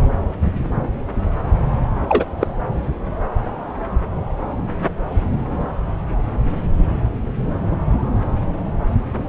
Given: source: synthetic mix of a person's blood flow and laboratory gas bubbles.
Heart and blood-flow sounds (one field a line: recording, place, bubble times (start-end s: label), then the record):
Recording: Doppler ultrasound of blood flow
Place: subclavian vein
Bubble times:
2.08-2.25 s: bubbles
2.40-2.48 s: bubbles
From the record:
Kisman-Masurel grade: 213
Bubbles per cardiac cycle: several, 3 to 8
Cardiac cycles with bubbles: 1 to 10%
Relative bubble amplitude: loud (0.450 to 0.775)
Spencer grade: 1 (occasional bubble signal discernible with the cardiac motion signal, with majority of cardiac periods free of bubbles)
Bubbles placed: anywhere in the cardiac cycle